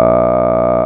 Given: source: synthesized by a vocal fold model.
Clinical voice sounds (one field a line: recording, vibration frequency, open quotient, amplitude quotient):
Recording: sustained vowel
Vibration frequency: 60 Hz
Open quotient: 0.2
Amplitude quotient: 1.3